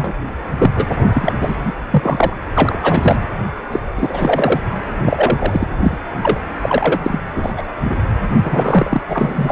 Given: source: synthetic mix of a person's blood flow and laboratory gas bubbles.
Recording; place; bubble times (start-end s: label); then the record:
Doppler ultrasound of blood flow; precordium
0.00-0.14 s: bubbles
0.58-0.67 s: bubbles
0.75-0.87 s: bubbles
0.98-1.09 s: bubbles
1.13-1.33 s: bubbles
1.40-1.56 s: bubbles
1.64-1.73 s: bubbles
1.91-2.36 s: bubbles
2.53-2.79 s: bubbles
2.82-3.19 s: bubbles
3.71-3.79 s: bubbles
3.96-4.62 s: bubbles
4.99-5.67 s: bubbles
5.83-5.97 s: bubbles
6.23-6.39 s: bubbles
6.62-7.17 s: bubbles
7.35-7.54 s: bubbles
7.57-7.62 s: bubbles
7.83-7.95 s: bubbles
8.41-9.02 s: bubbles
9.09-9.52 s: bubbles
From the record:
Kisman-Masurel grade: 243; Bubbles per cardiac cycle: several, 3 to 8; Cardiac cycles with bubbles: 100%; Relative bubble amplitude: loud (0.450 to 0.775); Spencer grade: 3 (all of the cardiac periods contain showers or single bubble signals, but not dominating or overriding the cardiac motion signals); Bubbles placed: anywhere in the cardiac cycle